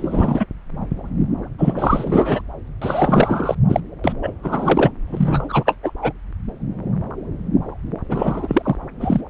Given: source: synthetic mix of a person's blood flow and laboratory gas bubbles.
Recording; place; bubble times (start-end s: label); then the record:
Doppler ultrasound of blood flow; subclavian vein
0.00-0.46 s: bubbles
1.58-2.42 s: bubbles
2.81-3.55 s: bubbles
3.68-3.80 s: bubbles
4.04-4.12 s: bubbles
4.23-4.33 s: bubbles
4.43-4.91 s: bubbles
5.08-5.75 s: bubbles
5.83-5.92 s: bubbles
6.02-6.12 s: bubbles
8.08-8.76 s: bubbles
9.00-9.21 s: bubbles
From the record:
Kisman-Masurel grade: 333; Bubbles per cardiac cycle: rolling drumbeat, 9 or more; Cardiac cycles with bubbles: 50 to 99%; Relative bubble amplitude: loud (0.450 to 0.775); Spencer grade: 3 (all of the cardiac periods contain showers or single bubble signals, but not dominating or overriding the cardiac motion signals); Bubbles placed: anywhere in the cardiac cycle